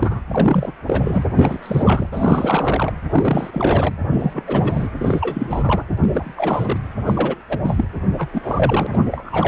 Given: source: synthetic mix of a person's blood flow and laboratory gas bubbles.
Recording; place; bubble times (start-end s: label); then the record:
Doppler ultrasound of blood flow; precordium
0.00-0.22 s: bubbles
0.29-0.72 s: bubbles
0.86-1.22 s: bubbles
1.34-2.09 s: bubbles
2.12-2.93 s: bubbles
3.08-3.93 s: bubbles
4.10-4.44 s: bubbles
4.47-4.89 s: bubbles
4.99-5.84 s: bubbles
6.00-6.78 s: bubbles
7.05-7.35 s: bubbles
7.48-7.58 s: bubbles
7.62-7.84 s: bubbles
8.18-8.28 s: bubbles
8.33-8.87 s: bubbles
8.89-9.04 s: bubbles
9.12-9.48 s: bubbles
From the record:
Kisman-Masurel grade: 343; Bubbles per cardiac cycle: rolling drumbeat, 9 or more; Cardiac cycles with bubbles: 100%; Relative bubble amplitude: loud (0.450 to 0.775); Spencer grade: 3 (all of the cardiac periods contain showers or single bubble signals, but not dominating or overriding the cardiac motion signals); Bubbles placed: anywhere in the cardiac cycle